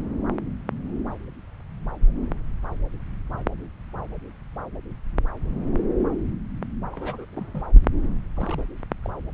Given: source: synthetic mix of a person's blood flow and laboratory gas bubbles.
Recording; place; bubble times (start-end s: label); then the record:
Doppler ultrasound of blood flow; subclavian vein
6.92-7.25 s: bubbles
7.30-7.69 s: bubbles
8.36-8.63 s: bubbles
9.03-9.10 s: bubbles
From the record:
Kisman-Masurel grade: 221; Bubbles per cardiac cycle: several, 3 to 8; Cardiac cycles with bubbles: 10 to 50%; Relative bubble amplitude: barely perceptible (0.100 to 0.250); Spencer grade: 2 (many but less than half of the cardiac periods contain bubble signals, singularly or in groups); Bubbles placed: anywhere in the cardiac cycle